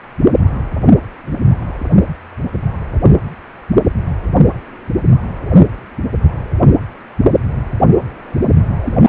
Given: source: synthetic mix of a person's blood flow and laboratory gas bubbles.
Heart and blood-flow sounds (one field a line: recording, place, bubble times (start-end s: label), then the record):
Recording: Doppler ultrasound of blood flow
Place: precordium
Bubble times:
8.80-8.95 s: bubbles
9.06-9.09 s: bubbles
From the record:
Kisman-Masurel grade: 212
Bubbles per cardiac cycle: several, 3 to 8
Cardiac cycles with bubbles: 1 to 10%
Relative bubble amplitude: moderate (0.250 to 0.450)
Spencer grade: 1 (occasional bubble signal discernible with the cardiac motion signal, with majority of cardiac periods free of bubbles)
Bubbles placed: anywhere in the cardiac cycle